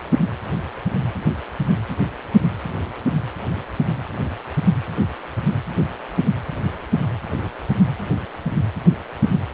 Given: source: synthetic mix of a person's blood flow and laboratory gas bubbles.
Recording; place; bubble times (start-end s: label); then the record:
Doppler ultrasound of blood flow; precordium
no bubbles
From the record:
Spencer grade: 0 (complete lack of bubble signals)